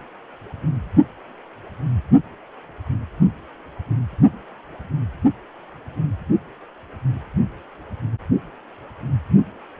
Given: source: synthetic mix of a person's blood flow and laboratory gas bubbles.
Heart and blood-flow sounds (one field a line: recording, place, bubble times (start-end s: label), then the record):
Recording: Doppler ultrasound of blood flow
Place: precordium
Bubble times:
no bubbles
From the record:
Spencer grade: 0 (complete lack of bubble signals)